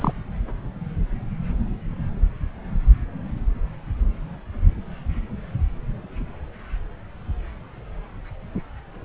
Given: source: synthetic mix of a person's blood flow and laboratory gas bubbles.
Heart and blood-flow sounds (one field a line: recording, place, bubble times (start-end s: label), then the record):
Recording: Doppler ultrasound of blood flow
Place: subclavian vein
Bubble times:
0.00-0.12 s: bubbles
From the record:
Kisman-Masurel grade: 212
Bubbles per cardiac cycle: several, 3 to 8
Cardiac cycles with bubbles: 1 to 10%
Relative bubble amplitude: moderate (0.250 to 0.450)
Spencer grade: 1 (occasional bubble signal discernible with the cardiac motion signal, with majority of cardiac periods free of bubbles)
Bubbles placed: anywhere in the cardiac cycle